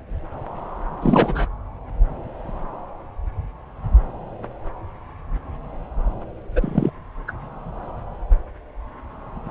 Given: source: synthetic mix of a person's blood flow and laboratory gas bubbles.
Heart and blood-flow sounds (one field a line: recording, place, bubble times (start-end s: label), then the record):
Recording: Doppler ultrasound of blood flow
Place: subclavian vein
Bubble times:
1.02-1.48 s: bubbles
6.55-6.91 s: bubbles
7.27-7.32 s: bubbles
From the record:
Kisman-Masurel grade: 212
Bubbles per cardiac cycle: several, 3 to 8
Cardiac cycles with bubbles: 1 to 10%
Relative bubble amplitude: moderate (0.250 to 0.450)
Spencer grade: 1 (occasional bubble signal discernible with the cardiac motion signal, with majority of cardiac periods free of bubbles)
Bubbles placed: anywhere in the cardiac cycle